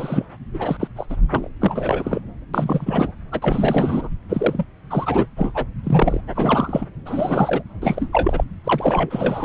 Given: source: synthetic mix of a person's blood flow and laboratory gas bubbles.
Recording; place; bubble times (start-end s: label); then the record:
Doppler ultrasound of blood flow; subclavian vein
0.00-0.25 s: bubbles
0.53-0.77 s: bubbles
0.79-0.88 s: bubbles
0.96-1.05 s: bubbles
1.09-1.16 s: bubbles
1.28-1.50 s: bubbles
1.61-2.20 s: bubbles
2.54-3.11 s: bubbles
3.32-4.09 s: bubbles
4.29-4.64 s: bubbles
4.90-5.26 s: bubbles
5.37-5.64 s: bubbles
5.83-6.21 s: bubbles
6.35-6.86 s: bubbles
7.05-7.62 s: bubbles
7.81-8.08 s: bubbles
8.12-8.44 s: bubbles
8.64-9.45 s: bubbles
From the record:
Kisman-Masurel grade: 342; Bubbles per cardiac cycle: rolling drumbeat, 9 or more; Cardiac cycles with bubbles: 100%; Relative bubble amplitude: moderate (0.250 to 0.450); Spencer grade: 3 (all of the cardiac periods contain showers or single bubble signals, but not dominating or overriding the cardiac motion signals); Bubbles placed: anywhere in the cardiac cycle